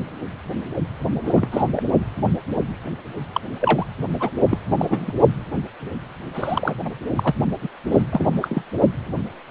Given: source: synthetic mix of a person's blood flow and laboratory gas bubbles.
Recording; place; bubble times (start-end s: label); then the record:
Doppler ultrasound of blood flow; precordium
1.25-1.47 s: bubbles
1.51-1.65 s: bubbles
1.74-1.86 s: bubbles
3.32-3.41 s: bubbles
3.60-3.86 s: bubbles
4.20-4.31 s: bubbles
4.50-4.58 s: bubbles
4.78-5.14 s: bubbles
6.35-6.78 s: bubbles
6.85-6.90 s: bubbles
7.16-7.35 s: bubbles
7.62-7.69 s: bubbles
7.91-8.04 s: bubbles
8.11-8.29 s: bubbles
8.41-8.62 s: bubbles
From the record:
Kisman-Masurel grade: 233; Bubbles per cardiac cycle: several, 3 to 8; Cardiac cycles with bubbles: 50 to 99%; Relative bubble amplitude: loud (0.450 to 0.775); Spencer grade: 3 (all of the cardiac periods contain showers or single bubble signals, but not dominating or overriding the cardiac motion signals); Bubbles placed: only in the low amplitude regions of the cardiac cycle